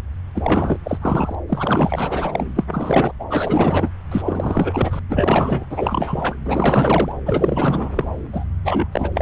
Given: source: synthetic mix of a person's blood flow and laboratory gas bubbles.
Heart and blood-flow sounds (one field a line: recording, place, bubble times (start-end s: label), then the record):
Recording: Doppler ultrasound of blood flow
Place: subclavian vein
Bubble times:
0.34-0.79 s: bubbles
0.83-0.98 s: bubbles
1.01-1.35 s: bubbles
1.49-2.46 s: bubbles
2.55-2.65 s: bubbles
2.73-3.12 s: bubbles
3.19-3.25 s: bubbles
3.29-3.89 s: bubbles
4.11-5.00 s: bubbles
5.09-5.67 s: bubbles
5.70-6.35 s: bubbles
6.45-7.13 s: bubbles
7.25-8.04 s: bubbles
8.32-8.44 s: bubbles
8.64-8.88 s: bubbles
8.91-9.11 s: bubbles
9.14-9.22 s: bubbles
From the record:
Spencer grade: 4 (maximum detectable bubble signal sounding continuously throughout systole and diastole of every cardiac period, and overriding the amplitude of the normal cardiac signals)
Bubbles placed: anywhere in the cardiac cycle